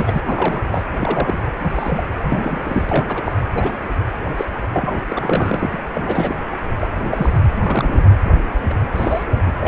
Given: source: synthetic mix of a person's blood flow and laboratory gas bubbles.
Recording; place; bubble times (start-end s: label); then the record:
Doppler ultrasound of blood flow; precordium
0.00-0.22 s: bubbles
0.26-0.61 s: bubbles
0.68-0.85 s: bubbles
1.00-1.42 s: bubbles
1.63-2.04 s: bubbles
2.22-3.05 s: bubbles
3.08-3.44 s: bubbles
3.54-3.88 s: bubbles
4.37-4.45 s: bubbles
4.73-5.00 s: bubbles
5.10-5.69 s: bubbles
5.72-5.77 s: bubbles
5.93-6.36 s: bubbles
6.80-6.87 s: bubbles
7.10-7.36 s: bubbles
7.65-8.05 s: bubbles
8.70-8.74 s: bubbles
8.92-9.23 s: bubbles
9.36-9.52 s: bubbles
9.57-9.68 s: bubbles
From the record:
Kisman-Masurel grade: 242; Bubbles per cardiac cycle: several, 3 to 8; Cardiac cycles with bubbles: 100%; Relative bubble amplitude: moderate (0.250 to 0.450); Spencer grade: 3 (all of the cardiac periods contain showers or single bubble signals, but not dominating or overriding the cardiac motion signals); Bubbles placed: anywhere in the cardiac cycle